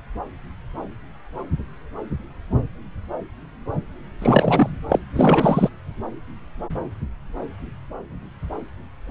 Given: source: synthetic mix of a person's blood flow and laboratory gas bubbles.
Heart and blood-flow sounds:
Doppler ultrasound of blood flow; subclavian vein
4.18-4.70 s: bubbles
4.89-5.00 s: bubbles
5.16-5.69 s: bubbles
From the record:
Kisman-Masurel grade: 223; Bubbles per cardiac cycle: several, 3 to 8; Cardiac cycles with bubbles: 10 to 50%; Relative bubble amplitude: loud (0.450 to 0.775); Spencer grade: 2 (many but less than half of the cardiac periods contain bubble signals, singularly or in groups); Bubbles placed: anywhere in the cardiac cycle

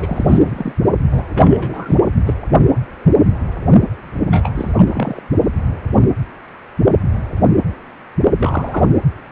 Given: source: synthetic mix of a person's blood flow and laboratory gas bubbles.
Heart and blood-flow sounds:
Doppler ultrasound of blood flow; precordium
0.00-0.73 s: bubbles
1.11-1.23 s: bubbles
1.28-1.99 s: bubbles
2.25-2.34 s: bubbles
4.30-4.53 s: bubbles
4.55-5.21 s: bubbles
8.38-8.85 s: bubbles
From the record:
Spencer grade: 2 (many but less than half of the cardiac periods contain bubble signals, singularly or in groups); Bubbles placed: only in the low amplitude regions of the cardiac cycle

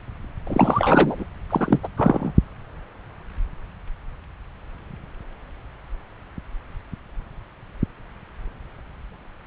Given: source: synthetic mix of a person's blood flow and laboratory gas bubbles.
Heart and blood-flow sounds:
Doppler ultrasound of blood flow; subclavian vein
0.47-1.25 s: bubbles
1.50-1.79 s: bubbles
1.82-1.88 s: bubbles
1.97-2.31 s: bubbles
From the record:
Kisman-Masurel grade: 223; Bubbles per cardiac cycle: several, 3 to 8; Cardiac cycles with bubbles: 10 to 50%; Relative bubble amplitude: loud (0.450 to 0.775); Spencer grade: 2 (many but less than half of the cardiac periods contain bubble signals, singularly or in groups); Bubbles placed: anywhere in the cardiac cycle

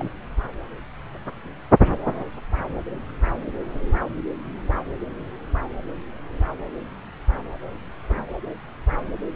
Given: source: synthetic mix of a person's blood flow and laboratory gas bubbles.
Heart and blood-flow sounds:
Doppler ultrasound of blood flow; subclavian vein
0.00-0.10 s: bubbles
From the record:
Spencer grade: 1 (occasional bubble signal discernible with the cardiac motion signal, with majority of cardiac periods free of bubbles); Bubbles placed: anywhere in the cardiac cycle

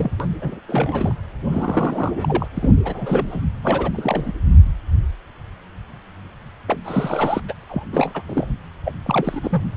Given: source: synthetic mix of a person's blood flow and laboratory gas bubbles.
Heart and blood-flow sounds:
Doppler ultrasound of blood flow; precordium
0.00-0.12 s: bubbles
0.20-0.26 s: bubbles
0.41-0.59 s: bubbles
0.68-1.13 s: bubbles
1.49-2.48 s: bubbles
2.57-2.70 s: bubbles
2.84-3.45 s: bubbles
3.62-4.32 s: bubbles
6.67-7.42 s: bubbles
7.48-7.54 s: bubbles
7.62-7.64 s: bubbles
7.69-7.83 s: bubbles
7.92-8.22 s: bubbles
8.28-8.46 s: bubbles
8.85-8.92 s: bubbles
9.06-9.40 s: bubbles
9.43-9.63 s: bubbles
From the record:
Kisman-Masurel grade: 332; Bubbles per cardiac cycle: rolling drumbeat, 9 or more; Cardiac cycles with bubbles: 50 to 99%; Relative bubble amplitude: moderate (0.250 to 0.450); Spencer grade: 3 (all of the cardiac periods contain showers or single bubble signals, but not dominating or overriding the cardiac motion signals); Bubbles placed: anywhere in the cardiac cycle

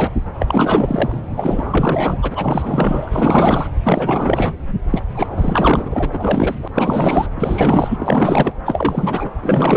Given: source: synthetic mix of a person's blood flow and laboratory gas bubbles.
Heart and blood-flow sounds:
Doppler ultrasound of blood flow; subclavian vein
0.00-0.12 s: bubbles
0.39-1.19 s: bubbles
1.36-3.67 s: bubbles
3.83-4.54 s: bubbles
4.90-5.01 s: bubbles
5.14-5.27 s: bubbles
5.30-6.55 s: bubbles
6.62-6.68 s: bubbles
6.74-7.27 s: bubbles
7.36-8.52 s: bubbles
8.65-9.30 s: bubbles
9.42-9.77 s: bubbles
From the record:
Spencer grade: 4 (maximum detectable bubble signal sounding continuously throughout systole and diastole of every cardiac period, and overriding the amplitude of the normal cardiac signals); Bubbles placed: anywhere in the cardiac cycle

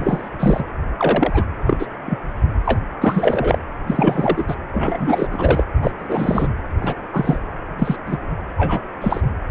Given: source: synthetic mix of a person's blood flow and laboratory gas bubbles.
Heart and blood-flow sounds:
Doppler ultrasound of blood flow; precordium
0.00-0.30 s: bubbles
0.40-0.65 s: bubbles
0.98-1.45 s: bubbles
1.66-1.86 s: bubbles
2.06-2.19 s: bubbles
2.65-2.79 s: bubbles
3.01-3.58 s: bubbles
3.87-4.55 s: bubbles
4.72-5.27 s: bubbles
5.31-5.65 s: bubbles
5.82-5.91 s: bubbles
5.98-6.48 s: bubbles
6.80-6.94 s: bubbles
7.13-7.39 s: bubbles
7.78-7.96 s: bubbles
8.07-8.17 s: bubbles
8.58-8.82 s: bubbles
9.01-9.21 s: bubbles
From the record:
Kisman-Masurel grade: 243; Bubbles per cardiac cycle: several, 3 to 8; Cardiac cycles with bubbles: 100%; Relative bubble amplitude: loud (0.450 to 0.775); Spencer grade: 3 (all of the cardiac periods contain showers or single bubble signals, but not dominating or overriding the cardiac motion signals); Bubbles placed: anywhere in the cardiac cycle

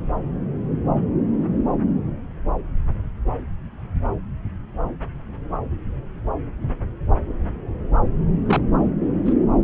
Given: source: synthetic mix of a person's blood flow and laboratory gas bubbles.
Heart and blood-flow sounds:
Doppler ultrasound of blood flow; subclavian vein
8.46-8.61 s: bubbles
9.25-9.33 s: bubbles
From the record:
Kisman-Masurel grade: 112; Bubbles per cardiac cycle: 1 to 2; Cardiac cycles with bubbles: 1 to 10%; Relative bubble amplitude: moderate (0.250 to 0.450); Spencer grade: 1 (occasional bubble signal discernible with the cardiac motion signal, with majority of cardiac periods free of bubbles); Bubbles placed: anywhere in the cardiac cycle

